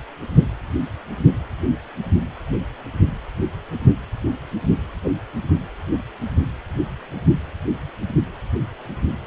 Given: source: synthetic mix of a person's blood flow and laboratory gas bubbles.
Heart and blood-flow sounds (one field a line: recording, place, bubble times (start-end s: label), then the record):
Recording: Doppler ultrasound of blood flow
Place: precordium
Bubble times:
5.03-5.12 s: bubbles
From the record:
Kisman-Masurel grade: 111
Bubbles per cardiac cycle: 1 to 2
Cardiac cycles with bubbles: 1 to 10%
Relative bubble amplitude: barely perceptible (0.100 to 0.250)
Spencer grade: 1 (occasional bubble signal discernible with the cardiac motion signal, with majority of cardiac periods free of bubbles)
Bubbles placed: anywhere in the cardiac cycle